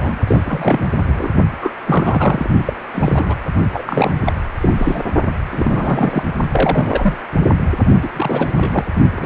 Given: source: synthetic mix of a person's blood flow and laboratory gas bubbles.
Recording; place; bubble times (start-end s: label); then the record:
Doppler ultrasound of blood flow; precordium
0.00-0.17 s: bubbles
0.27-0.40 s: bubbles
0.46-0.90 s: bubbles
0.98-1.33 s: bubbles
1.61-1.71 s: bubbles
1.86-2.50 s: bubbles
2.58-2.63 s: bubbles
2.66-2.73 s: bubbles
2.92-3.34 s: bubbles
3.73-4.21 s: bubbles
4.25-4.33 s: bubbles
4.62-5.02 s: bubbles
5.50-6.23 s: bubbles
6.52-7.17 s: bubbles
8.03-8.08 s: bubbles
8.16-8.51 s: bubbles
8.55-8.84 s: bubbles
9.15-9.26 s: bubbles
From the record:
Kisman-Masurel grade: 342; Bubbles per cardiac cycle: rolling drumbeat, 9 or more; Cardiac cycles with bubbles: 100%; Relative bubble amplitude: moderate (0.250 to 0.450); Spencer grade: 3 (all of the cardiac periods contain showers or single bubble signals, but not dominating or overriding the cardiac motion signals); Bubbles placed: only in the low amplitude regions of the cardiac cycle